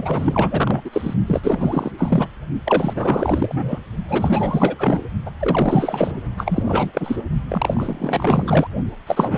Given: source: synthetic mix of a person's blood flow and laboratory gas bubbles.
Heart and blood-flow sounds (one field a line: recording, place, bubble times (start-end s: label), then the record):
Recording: Doppler ultrasound of blood flow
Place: precordium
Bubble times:
0.00-1.14 s: bubbles
1.26-1.92 s: bubbles
1.98-2.27 s: bubbles
2.65-3.79 s: bubbles
4.08-5.04 s: bubbles
5.25-5.31 s: bubbles
5.39-6.21 s: bubbles
6.37-7.23 s: bubbles
7.48-8.67 s: bubbles
9.06-9.38 s: bubbles
From the record:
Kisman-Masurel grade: 444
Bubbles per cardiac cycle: continuous sound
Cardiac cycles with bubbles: 100%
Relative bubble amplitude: maximal (0.775 to 0.999)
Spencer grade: 4 (maximum detectable bubble signal sounding continuously throughout systole and diastole of every cardiac period, and overriding the amplitude of the normal cardiac signals)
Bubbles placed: only in the low amplitude regions of the cardiac cycle